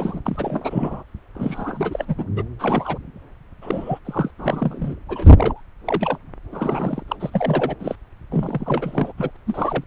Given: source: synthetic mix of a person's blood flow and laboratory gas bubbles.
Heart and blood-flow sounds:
Doppler ultrasound of blood flow; subclavian vein
0.00-0.21 s: bubbles
0.26-1.02 s: bubbles
1.35-2.05 s: bubbles
2.07-2.15 s: bubbles
2.18-2.25 s: bubbles
2.35-2.44 s: bubbles
2.59-2.98 s: bubbles
3.61-3.99 s: bubbles
4.04-4.31 s: bubbles
4.38-4.95 s: bubbles
5.08-5.60 s: bubbles
5.85-6.17 s: bubbles
6.51-7.03 s: bubbles
7.08-7.16 s: bubbles
7.20-7.75 s: bubbles
7.79-7.95 s: bubbles
8.31-9.12 s: bubbles
9.17-9.31 s: bubbles
9.47-9.84 s: bubbles
From the record:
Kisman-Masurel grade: 332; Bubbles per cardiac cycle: rolling drumbeat, 9 or more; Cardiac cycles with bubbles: 50 to 99%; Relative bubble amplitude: moderate (0.250 to 0.450); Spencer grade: 3 (all of the cardiac periods contain showers or single bubble signals, but not dominating or overriding the cardiac motion signals); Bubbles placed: anywhere in the cardiac cycle

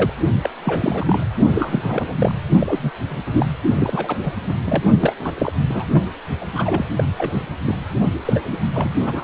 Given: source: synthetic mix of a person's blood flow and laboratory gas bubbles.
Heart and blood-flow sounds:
Doppler ultrasound of blood flow; precordium
0.00-0.13 s: bubbles
0.42-0.49 s: bubbles
0.65-1.25 s: bubbles
1.53-2.16 s: bubbles
2.19-2.35 s: bubbles
2.60-2.90 s: bubbles
3.08-3.24 s: bubbles
3.26-3.46 s: bubbles
3.75-4.17 s: bubbles
4.23-4.33 s: bubbles
4.49-4.53 s: bubbles
4.66-4.83 s: bubbles
5.00-5.16 s: bubbles
5.20-5.52 s: bubbles
5.69-6.07 s: bubbles
6.41-6.45 s: bubbles
6.53-6.89 s: bubbles
6.97-7.04 s: bubbles
7.17-7.46 s: bubbles
7.66-7.76 s: bubbles
8.25-8.39 s: bubbles
8.51-8.59 s: bubbles
8.74-8.89 s: bubbles
8.99-9.24 s: bubbles
From the record:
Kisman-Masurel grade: 332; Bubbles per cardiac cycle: rolling drumbeat, 9 or more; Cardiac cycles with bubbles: 50 to 99%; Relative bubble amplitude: moderate (0.250 to 0.450); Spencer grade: 3 (all of the cardiac periods contain showers or single bubble signals, but not dominating or overriding the cardiac motion signals); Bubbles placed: only in the low amplitude regions of the cardiac cycle

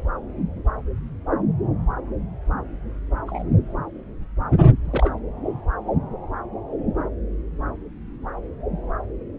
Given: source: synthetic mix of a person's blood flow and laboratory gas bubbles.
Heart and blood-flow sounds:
Doppler ultrasound of blood flow; subclavian vein
3.27-3.43 s: bubbles
4.87-5.15 s: bubbles
From the record:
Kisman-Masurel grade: 122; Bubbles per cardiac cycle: 1 to 2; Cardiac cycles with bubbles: 10 to 50%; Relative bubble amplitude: moderate (0.250 to 0.450); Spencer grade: 2 (many but less than half of the cardiac periods contain bubble signals, singularly or in groups); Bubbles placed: anywhere in the cardiac cycle

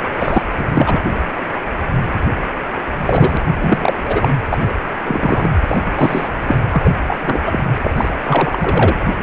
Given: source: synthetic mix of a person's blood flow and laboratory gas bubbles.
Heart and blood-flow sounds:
Doppler ultrasound of blood flow; precordium
0.20-0.43 s: bubbles
0.58-0.65 s: bubbles
0.73-1.02 s: bubbles
2.97-3.38 s: bubbles
3.59-3.99 s: bubbles
4.04-4.29 s: bubbles
4.49-4.58 s: bubbles
4.68-4.74 s: bubbles
5.05-5.50 s: bubbles
5.69-5.82 s: bubbles
5.95-6.29 s: bubbles
6.47-6.57 s: bubbles
6.71-6.90 s: bubbles
7.06-7.16 s: bubbles
7.24-7.60 s: bubbles
7.83-7.91 s: bubbles
7.96-8.09 s: bubbles
8.22-8.96 s: bubbles
From the record:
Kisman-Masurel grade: 233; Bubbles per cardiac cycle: several, 3 to 8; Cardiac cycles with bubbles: 50 to 99%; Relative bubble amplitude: loud (0.450 to 0.775); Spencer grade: 3 (all of the cardiac periods contain showers or single bubble signals, but not dominating or overriding the cardiac motion signals); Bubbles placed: anywhere in the cardiac cycle

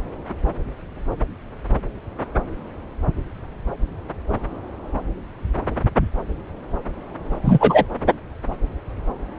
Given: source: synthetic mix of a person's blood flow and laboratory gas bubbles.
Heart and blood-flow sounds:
Doppler ultrasound of blood flow; subclavian vein
7.44-7.85 s: bubbles
From the record:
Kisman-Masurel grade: 113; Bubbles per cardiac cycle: 1 to 2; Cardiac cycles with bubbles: 1 to 10%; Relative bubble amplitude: loud (0.450 to 0.775); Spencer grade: 1 (occasional bubble signal discernible with the cardiac motion signal, with majority of cardiac periods free of bubbles); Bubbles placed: anywhere in the cardiac cycle

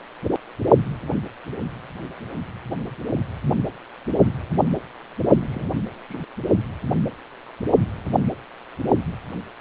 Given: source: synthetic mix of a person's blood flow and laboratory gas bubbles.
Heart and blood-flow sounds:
Doppler ultrasound of blood flow; precordium
5.34-5.71 s: bubbles
6.09-6.22 s: bubbles
From the record:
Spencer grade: 2 (many but less than half of the cardiac periods contain bubble signals, singularly or in groups); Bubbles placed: only in the low amplitude regions of the cardiac cycle

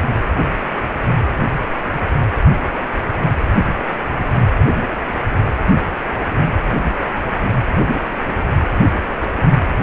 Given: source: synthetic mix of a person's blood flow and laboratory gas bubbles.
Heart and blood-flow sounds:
Doppler ultrasound of blood flow; precordium
8.68-8.73 s: bubbles
9.09-9.13 s: bubbles
9.16-9.30 s: bubbles
9.37-9.43 s: bubbles
From the record:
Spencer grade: 1 (occasional bubble signal discernible with the cardiac motion signal, with majority of cardiac periods free of bubbles); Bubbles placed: anywhere in the cardiac cycle

